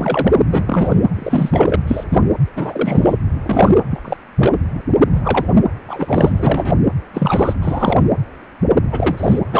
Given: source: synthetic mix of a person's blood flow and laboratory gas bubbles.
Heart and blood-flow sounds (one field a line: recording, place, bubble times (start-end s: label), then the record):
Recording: Doppler ultrasound of blood flow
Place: precordium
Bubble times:
0.00-0.38 s: bubbles
0.51-0.62 s: bubbles
0.66-0.97 s: bubbles
1.14-1.76 s: bubbles
1.87-2.04 s: bubbles
2.09-2.19 s: bubbles
2.56-3.14 s: bubbles
3.42-3.75 s: bubbles
3.90-4.17 s: bubbles
4.38-4.58 s: bubbles
5.15-5.46 s: bubbles
5.88-6.75 s: bubbles
7.14-7.54 s: bubbles
7.62-7.99 s: bubbles
8.92-9.39 s: bubbles
9.52-9.60 s: bubbles
From the record:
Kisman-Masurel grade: 233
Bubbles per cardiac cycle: several, 3 to 8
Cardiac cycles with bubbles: 50 to 99%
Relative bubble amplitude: loud (0.450 to 0.775)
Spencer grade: 3 (all of the cardiac periods contain showers or single bubble signals, but not dominating or overriding the cardiac motion signals)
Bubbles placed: anywhere in the cardiac cycle